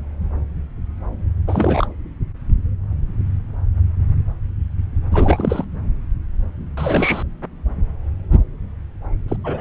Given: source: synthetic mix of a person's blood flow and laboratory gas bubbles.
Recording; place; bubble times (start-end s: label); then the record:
Doppler ultrasound of blood flow; subclavian vein
1.48-1.87 s: bubbles
5.11-5.64 s: bubbles
6.77-7.22 s: bubbles
9.28-9.37 s: bubbles
9.44-9.61 s: bubbles
From the record:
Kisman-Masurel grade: 222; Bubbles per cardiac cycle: several, 3 to 8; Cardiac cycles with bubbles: 10 to 50%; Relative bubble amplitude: moderate (0.250 to 0.450); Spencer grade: 2 (many but less than half of the cardiac periods contain bubble signals, singularly or in groups); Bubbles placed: anywhere in the cardiac cycle